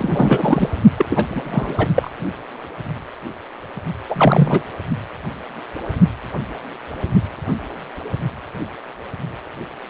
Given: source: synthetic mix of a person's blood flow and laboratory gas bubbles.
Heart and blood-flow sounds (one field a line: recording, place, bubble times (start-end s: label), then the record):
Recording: Doppler ultrasound of blood flow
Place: precordium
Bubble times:
0.00-0.69 s: bubbles
0.97-1.05 s: bubbles
1.10-1.74 s: bubbles
1.77-1.88 s: bubbles
1.96-2.10 s: bubbles
4.08-4.62 s: bubbles
From the record:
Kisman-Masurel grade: 223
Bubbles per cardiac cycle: several, 3 to 8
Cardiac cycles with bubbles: 10 to 50%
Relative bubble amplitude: loud (0.450 to 0.775)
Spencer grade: 2 (many but less than half of the cardiac periods contain bubble signals, singularly or in groups)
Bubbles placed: only in the low amplitude regions of the cardiac cycle